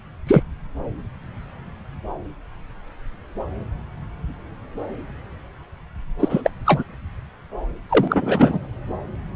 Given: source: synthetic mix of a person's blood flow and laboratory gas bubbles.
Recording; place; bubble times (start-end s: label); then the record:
Doppler ultrasound of blood flow; subclavian vein
0.27-0.43 s: bubbles
6.19-6.50 s: bubbles
6.65-6.84 s: bubbles
7.89-8.60 s: bubbles
From the record:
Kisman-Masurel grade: 223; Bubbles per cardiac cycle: several, 3 to 8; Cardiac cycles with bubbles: 10 to 50%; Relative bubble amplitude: loud (0.450 to 0.775); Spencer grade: 2 (many but less than half of the cardiac periods contain bubble signals, singularly or in groups); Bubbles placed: anywhere in the cardiac cycle